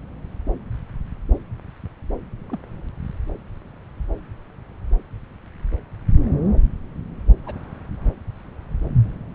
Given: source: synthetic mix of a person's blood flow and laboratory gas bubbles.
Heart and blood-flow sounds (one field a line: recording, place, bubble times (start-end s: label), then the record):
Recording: Doppler ultrasound of blood flow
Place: subclavian vein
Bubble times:
2.48-2.58 s: bubbles
7.46-7.54 s: bubbles
From the record:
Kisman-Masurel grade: 121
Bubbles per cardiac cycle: 1 to 2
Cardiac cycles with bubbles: 10 to 50%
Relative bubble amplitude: barely perceptible (0.100 to 0.250)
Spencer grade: 2 (many but less than half of the cardiac periods contain bubble signals, singularly or in groups)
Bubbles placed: anywhere in the cardiac cycle